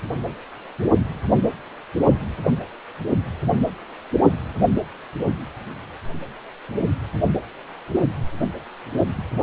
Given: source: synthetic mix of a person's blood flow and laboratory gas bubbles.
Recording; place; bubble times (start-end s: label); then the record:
Doppler ultrasound of blood flow; precordium
no bubbles
From the record:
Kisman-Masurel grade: 000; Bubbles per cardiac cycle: 0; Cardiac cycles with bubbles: 0%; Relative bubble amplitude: no bubbles discernible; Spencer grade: 0 (complete lack of bubble signals)